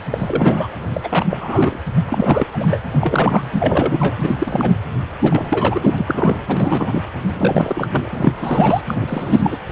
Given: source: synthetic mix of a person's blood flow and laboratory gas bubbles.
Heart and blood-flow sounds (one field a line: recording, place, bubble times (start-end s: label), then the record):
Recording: Doppler ultrasound of blood flow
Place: precordium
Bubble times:
0.00-0.02 s: bubbles
0.10-0.67 s: bubbles
0.93-1.26 s: bubbles
1.30-1.38 s: bubbles
1.41-1.79 s: bubbles
2.08-2.47 s: bubbles
2.54-2.78 s: bubbles
2.93-3.42 s: bubbles
3.52-4.74 s: bubbles
5.21-6.39 s: bubbles
6.48-7.04 s: bubbles
7.29-8.32 s: bubbles
8.38-8.81 s: bubbles
8.87-9.57 s: bubbles
9.68-9.72 s: bubbles
From the record:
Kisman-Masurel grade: 342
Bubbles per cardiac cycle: rolling drumbeat, 9 or more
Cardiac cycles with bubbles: 100%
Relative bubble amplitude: moderate (0.250 to 0.450)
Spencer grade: 3 (all of the cardiac periods contain showers or single bubble signals, but not dominating or overriding the cardiac motion signals)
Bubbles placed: anywhere in the cardiac cycle